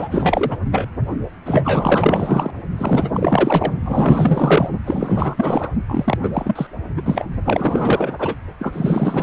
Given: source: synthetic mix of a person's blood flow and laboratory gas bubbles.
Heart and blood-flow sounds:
Doppler ultrasound of blood flow; precordium
0.00-0.58 s: bubbles
0.71-0.88 s: bubbles
1.46-2.50 s: bubbles
2.77-3.09 s: bubbles
3.13-3.73 s: bubbles
3.79-4.70 s: bubbles
4.87-5.71 s: bubbles
5.87-6.18 s: bubbles
6.23-6.31 s: bubbles
6.33-6.67 s: bubbles
6.96-7.02 s: bubbles
7.05-7.25 s: bubbles
7.43-8.36 s: bubbles
8.59-9.23 s: bubbles
From the record:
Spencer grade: 4 (maximum detectable bubble signal sounding continuously throughout systole and diastole of every cardiac period, and overriding the amplitude of the normal cardiac signals); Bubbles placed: only in the low amplitude regions of the cardiac cycle

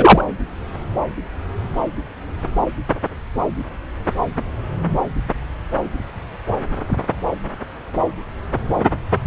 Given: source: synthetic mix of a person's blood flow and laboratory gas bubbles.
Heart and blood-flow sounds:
Doppler ultrasound of blood flow; subclavian vein
0.00-0.24 s: bubbles
From the record:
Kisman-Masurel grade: 123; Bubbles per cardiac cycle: 1 to 2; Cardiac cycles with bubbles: 10 to 50%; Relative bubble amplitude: loud (0.450 to 0.775); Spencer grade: 2 (many but less than half of the cardiac periods contain bubble signals, singularly or in groups); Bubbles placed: anywhere in the cardiac cycle

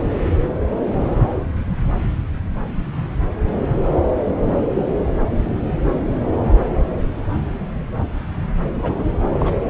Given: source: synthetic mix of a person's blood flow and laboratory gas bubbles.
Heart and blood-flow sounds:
Doppler ultrasound of blood flow; subclavian vein
8.82-8.93 s: bubbles
8.98-9.03 s: bubbles
9.11-9.17 s: bubbles
9.33-9.57 s: bubbles
From the record:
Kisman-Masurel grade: 212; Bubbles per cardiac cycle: several, 3 to 8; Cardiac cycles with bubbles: 1 to 10%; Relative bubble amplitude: moderate (0.250 to 0.450); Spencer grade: 1 (occasional bubble signal discernible with the cardiac motion signal, with majority of cardiac periods free of bubbles); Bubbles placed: anywhere in the cardiac cycle

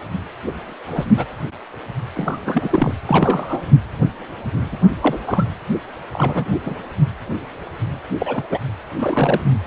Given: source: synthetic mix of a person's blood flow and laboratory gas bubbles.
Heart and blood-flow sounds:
Doppler ultrasound of blood flow; precordium
0.46-0.53 s: bubbles
0.96-1.04 s: bubbles
1.16-1.26 s: bubbles
2.15-2.94 s: bubbles
3.05-3.61 s: bubbles
4.71-4.77 s: bubbles
5.00-5.20 s: bubbles
5.26-5.45 s: bubbles
6.12-6.56 s: bubbles
6.66-6.75 s: bubbles
8.19-8.43 s: bubbles
8.50-8.59 s: bubbles
8.96-9.49 s: bubbles
From the record:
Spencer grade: 3 (all of the cardiac periods contain showers or single bubble signals, but not dominating or overriding the cardiac motion signals); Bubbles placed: anywhere in the cardiac cycle

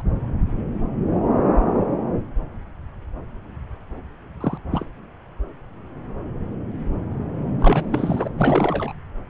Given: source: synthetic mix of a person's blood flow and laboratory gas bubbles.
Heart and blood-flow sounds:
Doppler ultrasound of blood flow; subclavian vein
4.41-4.58 s: bubbles
4.71-4.86 s: bubbles
7.61-8.27 s: bubbles
8.38-8.92 s: bubbles
From the record:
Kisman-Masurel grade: 222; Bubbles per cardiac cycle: several, 3 to 8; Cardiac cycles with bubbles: 10 to 50%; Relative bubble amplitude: moderate (0.250 to 0.450); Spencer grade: 2 (many but less than half of the cardiac periods contain bubble signals, singularly or in groups); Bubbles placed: anywhere in the cardiac cycle

